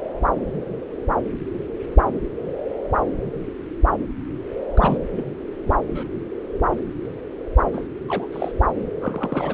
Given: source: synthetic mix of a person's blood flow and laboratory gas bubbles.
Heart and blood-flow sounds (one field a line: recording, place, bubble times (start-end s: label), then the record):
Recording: Doppler ultrasound of blood flow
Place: subclavian vein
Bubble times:
4.60-4.65 s: bubbles
4.75-4.98 s: bubbles
5.16-5.26 s: bubbles
5.66-5.71 s: bubbles
5.89-6.08 s: bubbles
7.74-7.85 s: bubbles
8.09-8.27 s: bubbles
8.32-8.52 s: bubbles
8.82-8.87 s: bubbles
9.02-9.54 s: bubbles
From the record:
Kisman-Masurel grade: 221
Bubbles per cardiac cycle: several, 3 to 8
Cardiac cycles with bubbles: 10 to 50%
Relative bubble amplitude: barely perceptible (0.100 to 0.250)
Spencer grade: 2 (many but less than half of the cardiac periods contain bubble signals, singularly or in groups)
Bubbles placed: anywhere in the cardiac cycle